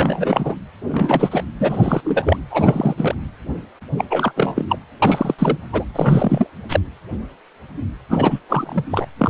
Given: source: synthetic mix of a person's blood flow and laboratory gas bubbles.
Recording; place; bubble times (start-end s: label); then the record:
Doppler ultrasound of blood flow; precordium
0.00-0.55 s: bubbles
0.88-1.44 s: bubbles
1.60-2.00 s: bubbles
2.04-2.37 s: bubbles
2.50-3.15 s: bubbles
3.96-4.05 s: bubbles
4.09-4.32 s: bubbles
4.36-4.65 s: bubbles
4.67-4.79 s: bubbles
5.02-5.34 s: bubbles
5.38-5.58 s: bubbles
5.72-5.84 s: bubbles
5.93-6.50 s: bubbles
6.69-6.80 s: bubbles
8.09-8.39 s: bubbles
8.48-8.84 s: bubbles
8.90-9.07 s: bubbles
9.18-9.30 s: bubbles
From the record:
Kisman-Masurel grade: 333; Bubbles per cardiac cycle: rolling drumbeat, 9 or more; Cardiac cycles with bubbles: 50 to 99%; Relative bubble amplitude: loud (0.450 to 0.775); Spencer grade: 3 (all of the cardiac periods contain showers or single bubble signals, but not dominating or overriding the cardiac motion signals); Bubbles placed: anywhere in the cardiac cycle